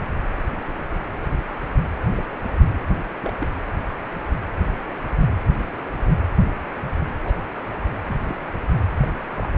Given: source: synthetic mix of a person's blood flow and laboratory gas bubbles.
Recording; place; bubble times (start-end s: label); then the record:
Doppler ultrasound of blood flow; precordium
2.18-2.23 s: bubbles
2.44-2.50 s: bubbles
3.22-3.33 s: bubbles
3.39-3.48 s: bubbles
7.24-7.36 s: bubbles
8.05-8.17 s: bubbles
8.25-8.36 s: bubbles
9.01-9.12 s: bubbles
9.27-9.48 s: bubbles
From the record:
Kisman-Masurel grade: 121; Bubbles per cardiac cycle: 1 to 2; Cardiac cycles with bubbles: 10 to 50%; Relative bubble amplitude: barely perceptible (0.100 to 0.250); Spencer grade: 2 (many but less than half of the cardiac periods contain bubble signals, singularly or in groups); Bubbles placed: anywhere in the cardiac cycle